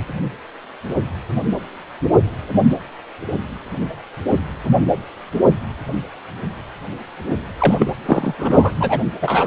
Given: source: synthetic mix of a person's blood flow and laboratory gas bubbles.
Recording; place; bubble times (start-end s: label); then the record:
Doppler ultrasound of blood flow; precordium
7.58-7.74 s: bubbles
7.79-7.86 s: bubbles
8.05-8.34 s: bubbles
8.38-8.73 s: bubbles
8.79-9.00 s: bubbles
9.21-9.47 s: bubbles
From the record:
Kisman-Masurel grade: 223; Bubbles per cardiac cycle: several, 3 to 8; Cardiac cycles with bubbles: 10 to 50%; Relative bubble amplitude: loud (0.450 to 0.775); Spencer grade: 2 (many but less than half of the cardiac periods contain bubble signals, singularly or in groups); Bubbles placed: anywhere in the cardiac cycle